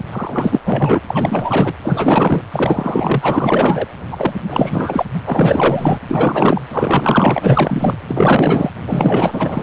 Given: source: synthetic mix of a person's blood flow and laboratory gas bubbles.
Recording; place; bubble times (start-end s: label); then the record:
Doppler ultrasound of blood flow; precordium
0.12-0.59 s: bubbles
0.65-0.99 s: bubbles
1.07-1.73 s: bubbles
1.83-2.42 s: bubbles
2.52-3.87 s: bubbles
4.11-4.33 s: bubbles
4.50-5.04 s: bubbles
5.26-5.99 s: bubbles
6.08-6.62 s: bubbles
6.71-7.98 s: bubbles
8.08-8.70 s: bubbles
8.87-9.63 s: bubbles
From the record:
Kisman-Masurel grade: 444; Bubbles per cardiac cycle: continuous sound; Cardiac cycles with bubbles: 100%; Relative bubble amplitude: maximal (0.775 to 0.999); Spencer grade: 4 (maximum detectable bubble signal sounding continuously throughout systole and diastole of every cardiac period, and overriding the amplitude of the normal cardiac signals); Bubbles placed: anywhere in the cardiac cycle